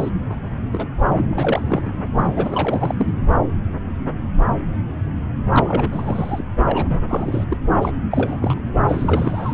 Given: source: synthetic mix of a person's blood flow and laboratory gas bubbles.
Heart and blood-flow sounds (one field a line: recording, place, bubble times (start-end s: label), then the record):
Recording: Doppler ultrasound of blood flow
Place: subclavian vein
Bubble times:
0.00-0.10 s: bubbles
0.29-0.36 s: bubbles
0.72-0.85 s: bubbles
1.08-1.93 s: bubbles
2.17-2.95 s: bubbles
2.98-3.14 s: bubbles
5.53-6.44 s: bubbles
6.65-7.00 s: bubbles
7.08-7.46 s: bubbles
7.50-7.57 s: bubbles
7.81-7.91 s: bubbles
8.11-8.38 s: bubbles
8.42-8.61 s: bubbles
8.88-9.54 s: bubbles
From the record:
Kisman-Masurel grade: 332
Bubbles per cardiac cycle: rolling drumbeat, 9 or more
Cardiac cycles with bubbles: 50 to 99%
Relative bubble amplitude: moderate (0.250 to 0.450)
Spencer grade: 3 (all of the cardiac periods contain showers or single bubble signals, but not dominating or overriding the cardiac motion signals)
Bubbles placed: anywhere in the cardiac cycle